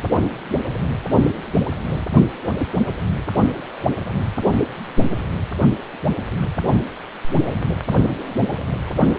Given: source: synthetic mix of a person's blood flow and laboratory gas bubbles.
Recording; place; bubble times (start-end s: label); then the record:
Doppler ultrasound of blood flow; precordium
no bubbles
From the record:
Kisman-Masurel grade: 000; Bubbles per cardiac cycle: 0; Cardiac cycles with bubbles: 0%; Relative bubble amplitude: no bubbles discernible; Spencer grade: 0 (complete lack of bubble signals)